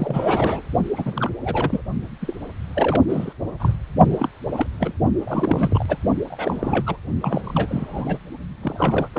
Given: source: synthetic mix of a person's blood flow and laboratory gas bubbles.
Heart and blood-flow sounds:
Doppler ultrasound of blood flow; precordium
0.00-0.62 s: bubbles
0.96-1.31 s: bubbles
1.42-1.82 s: bubbles
2.21-2.35 s: bubbles
2.74-3.04 s: bubbles
3.07-3.33 s: bubbles
3.59-3.76 s: bubbles
4.10-4.29 s: bubbles
4.51-4.67 s: bubbles
4.79-4.93 s: bubbles
5.18-5.97 s: bubbles
6.30-6.96 s: bubbles
7.20-7.41 s: bubbles
7.43-8.18 s: bubbles
8.62-9.08 s: bubbles
9.13-9.19 s: bubbles
From the record:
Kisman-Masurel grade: 342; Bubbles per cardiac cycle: rolling drumbeat, 9 or more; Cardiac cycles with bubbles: 100%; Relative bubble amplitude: moderate (0.250 to 0.450); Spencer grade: 3 (all of the cardiac periods contain showers or single bubble signals, but not dominating or overriding the cardiac motion signals); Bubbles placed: only in the low amplitude regions of the cardiac cycle

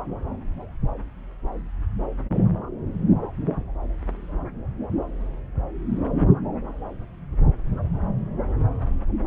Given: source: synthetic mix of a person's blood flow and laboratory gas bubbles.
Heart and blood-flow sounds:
Doppler ultrasound of blood flow; subclavian vein
no bubbles
From the record:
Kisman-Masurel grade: 000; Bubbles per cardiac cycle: 0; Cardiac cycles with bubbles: 0%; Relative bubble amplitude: no bubbles discernible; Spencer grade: 0 (complete lack of bubble signals)

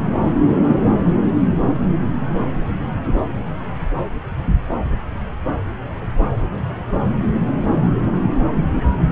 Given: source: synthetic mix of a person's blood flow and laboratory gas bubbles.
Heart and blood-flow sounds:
Doppler ultrasound of blood flow; subclavian vein
no bubbles
From the record:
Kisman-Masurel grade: 000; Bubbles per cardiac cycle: 0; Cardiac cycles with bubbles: 0%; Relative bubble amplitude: no bubbles discernible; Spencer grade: 0 (complete lack of bubble signals)

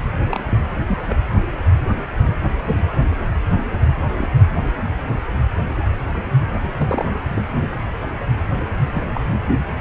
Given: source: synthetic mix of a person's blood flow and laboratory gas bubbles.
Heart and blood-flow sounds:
Doppler ultrasound of blood flow; precordium
0.29-0.58 s: bubbles
0.88-0.98 s: bubbles
1.07-1.16 s: bubbles
2.65-2.80 s: bubbles
3.52-3.56 s: bubbles
4.17-4.28 s: bubbles
6.77-7.05 s: bubbles
7.34-7.45 s: bubbles
7.62-7.69 s: bubbles
8.93-9.02 s: bubbles
9.14-9.37 s: bubbles
From the record:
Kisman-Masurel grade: 122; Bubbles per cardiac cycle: 1 to 2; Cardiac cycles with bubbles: 10 to 50%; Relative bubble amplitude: moderate (0.250 to 0.450); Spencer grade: 2 (many but less than half of the cardiac periods contain bubble signals, singularly or in groups); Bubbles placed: anywhere in the cardiac cycle

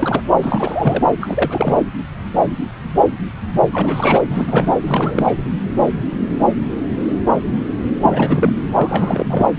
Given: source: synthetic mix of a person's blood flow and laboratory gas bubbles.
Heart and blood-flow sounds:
Doppler ultrasound of blood flow; subclavian vein
0.00-0.21 s: bubbles
0.42-1.04 s: bubbles
1.21-1.75 s: bubbles
3.73-4.21 s: bubbles
4.30-4.79 s: bubbles
4.87-5.41 s: bubbles
8.02-8.55 s: bubbles
8.75-9.51 s: bubbles
From the record:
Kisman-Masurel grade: 332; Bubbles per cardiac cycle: rolling drumbeat, 9 or more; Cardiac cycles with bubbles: 50 to 99%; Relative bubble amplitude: moderate (0.250 to 0.450); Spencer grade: 3 (all of the cardiac periods contain showers or single bubble signals, but not dominating or overriding the cardiac motion signals); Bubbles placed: anywhere in the cardiac cycle

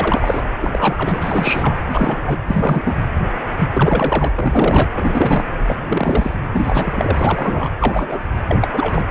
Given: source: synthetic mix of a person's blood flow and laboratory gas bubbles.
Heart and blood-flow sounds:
Doppler ultrasound of blood flow; precordium
0.00-0.45 s: bubbles
0.57-1.79 s: bubbles
1.93-2.39 s: bubbles
2.47-3.04 s: bubbles
3.74-4.32 s: bubbles
4.34-4.89 s: bubbles
4.94-5.46 s: bubbles
5.66-6.35 s: bubbles
6.53-7.70 s: bubbles
7.79-8.19 s: bubbles
8.48-8.68 s: bubbles
8.72-9.05 s: bubbles
From the record:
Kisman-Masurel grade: 332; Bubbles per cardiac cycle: rolling drumbeat, 9 or more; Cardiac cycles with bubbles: 50 to 99%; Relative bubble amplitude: moderate (0.250 to 0.450); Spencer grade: 3 (all of the cardiac periods contain showers or single bubble signals, but not dominating or overriding the cardiac motion signals); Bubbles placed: anywhere in the cardiac cycle

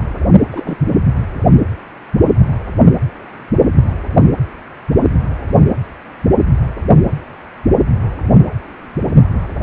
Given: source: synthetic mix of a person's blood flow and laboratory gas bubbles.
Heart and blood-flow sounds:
Doppler ultrasound of blood flow; precordium
0.52-0.76 s: bubbles
From the record:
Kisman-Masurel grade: 113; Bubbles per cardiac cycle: 1 to 2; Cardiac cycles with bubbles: 1 to 10%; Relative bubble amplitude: loud (0.450 to 0.775); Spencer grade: 1 (occasional bubble signal discernible with the cardiac motion signal, with majority of cardiac periods free of bubbles); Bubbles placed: anywhere in the cardiac cycle

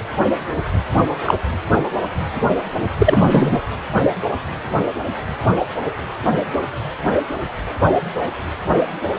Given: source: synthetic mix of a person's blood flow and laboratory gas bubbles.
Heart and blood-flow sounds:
Doppler ultrasound of blood flow; precordium
1.25-1.34 s: bubbles
2.98-3.58 s: bubbles
From the record:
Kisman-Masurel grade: 123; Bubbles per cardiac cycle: 1 to 2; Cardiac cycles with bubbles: 10 to 50%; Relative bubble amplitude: loud (0.450 to 0.775); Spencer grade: 2 (many but less than half of the cardiac periods contain bubble signals, singularly or in groups); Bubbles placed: anywhere in the cardiac cycle

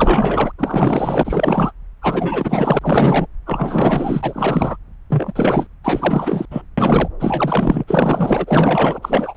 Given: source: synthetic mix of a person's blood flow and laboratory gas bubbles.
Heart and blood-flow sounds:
Doppler ultrasound of blood flow; subclavian vein
0.00-0.52 s: bubbles
0.58-1.72 s: bubbles
2.01-3.26 s: bubbles
3.46-4.76 s: bubbles
5.09-5.33 s: bubbles
5.35-5.67 s: bubbles
5.83-6.46 s: bubbles
6.50-6.62 s: bubbles
6.77-7.08 s: bubbles
7.20-7.84 s: bubbles
7.87-8.98 s: bubbles
9.02-9.37 s: bubbles
From the record:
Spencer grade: 4 (maximum detectable bubble signal sounding continuously throughout systole and diastole of every cardiac period, and overriding the amplitude of the normal cardiac signals); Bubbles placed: anywhere in the cardiac cycle

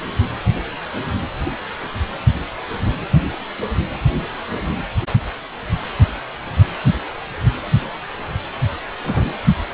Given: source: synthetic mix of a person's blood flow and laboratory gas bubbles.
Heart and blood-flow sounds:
Doppler ultrasound of blood flow; precordium
9.05-9.32 s: bubbles
From the record:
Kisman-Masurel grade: 112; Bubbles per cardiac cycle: 1 to 2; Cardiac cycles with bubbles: 1 to 10%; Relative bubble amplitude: moderate (0.250 to 0.450); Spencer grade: 1 (occasional bubble signal discernible with the cardiac motion signal, with majority of cardiac periods free of bubbles); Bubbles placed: anywhere in the cardiac cycle

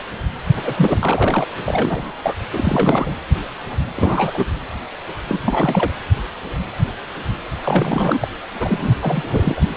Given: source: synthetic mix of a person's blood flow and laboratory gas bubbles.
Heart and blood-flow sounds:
Doppler ultrasound of blood flow; precordium
0.65-0.75 s: bubbles
0.77-1.47 s: bubbles
1.66-2.12 s: bubbles
2.22-2.35 s: bubbles
2.52-3.15 s: bubbles
3.96-4.47 s: bubbles
5.27-5.39 s: bubbles
5.45-5.92 s: bubbles
7.64-8.28 s: bubbles
8.60-8.94 s: bubbles
9.01-9.64 s: bubbles
From the record:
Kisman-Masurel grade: 332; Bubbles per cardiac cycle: rolling drumbeat, 9 or more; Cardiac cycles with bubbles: 50 to 99%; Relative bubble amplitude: moderate (0.250 to 0.450); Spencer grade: 3 (all of the cardiac periods contain showers or single bubble signals, but not dominating or overriding the cardiac motion signals); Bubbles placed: anywhere in the cardiac cycle

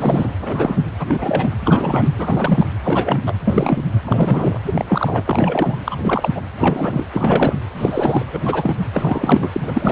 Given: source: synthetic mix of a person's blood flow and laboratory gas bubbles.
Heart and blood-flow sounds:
Doppler ultrasound of blood flow; precordium
0.00-0.32 s: bubbles
0.39-0.83 s: bubbles
0.99-1.49 s: bubbles
1.65-2.09 s: bubbles
2.19-2.65 s: bubbles
2.83-3.19 s: bubbles
3.26-3.34 s: bubbles
3.44-3.86 s: bubbles
4.05-4.61 s: bubbles
4.66-4.85 s: bubbles
4.88-5.23 s: bubbles
5.27-5.78 s: bubbles
5.84-5.97 s: bubbles
6.02-6.41 s: bubbles
6.59-7.06 s: bubbles
7.13-7.59 s: bubbles
7.78-8.26 s: bubbles
8.32-8.39 s: bubbles
8.43-8.74 s: bubbles
8.94-9.50 s: bubbles
9.53-9.92 s: bubbles
From the record:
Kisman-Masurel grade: 342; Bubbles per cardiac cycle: rolling drumbeat, 9 or more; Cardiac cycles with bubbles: 100%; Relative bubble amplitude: moderate (0.250 to 0.450); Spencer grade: 3 (all of the cardiac periods contain showers or single bubble signals, but not dominating or overriding the cardiac motion signals); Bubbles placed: anywhere in the cardiac cycle

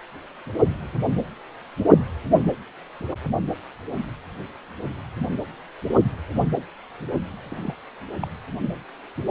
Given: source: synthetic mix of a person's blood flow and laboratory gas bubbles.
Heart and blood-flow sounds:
Doppler ultrasound of blood flow; precordium
7.42-7.74 s: bubbles
8.23-8.27 s: bubbles
From the record:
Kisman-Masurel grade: 111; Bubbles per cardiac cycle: 1 to 2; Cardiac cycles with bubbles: 1 to 10%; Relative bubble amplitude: barely perceptible (0.100 to 0.250); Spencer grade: 1 (occasional bubble signal discernible with the cardiac motion signal, with majority of cardiac periods free of bubbles); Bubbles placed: anywhere in the cardiac cycle

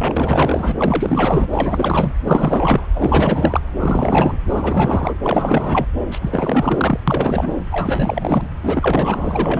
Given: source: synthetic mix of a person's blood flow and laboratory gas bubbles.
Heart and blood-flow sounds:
Doppler ultrasound of blood flow; subclavian vein
0.00-1.47 s: bubbles
1.51-2.12 s: bubbles
2.25-2.88 s: bubbles
2.95-3.61 s: bubbles
3.79-4.38 s: bubbles
4.48-5.18 s: bubbles
5.22-5.86 s: bubbles
6.11-7.00 s: bubbles
7.07-7.53 s: bubbles
7.71-8.47 s: bubbles
8.62-9.60 s: bubbles
From the record:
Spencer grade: 4 (maximum detectable bubble signal sounding continuously throughout systole and diastole of every cardiac period, and overriding the amplitude of the normal cardiac signals); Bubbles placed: anywhere in the cardiac cycle

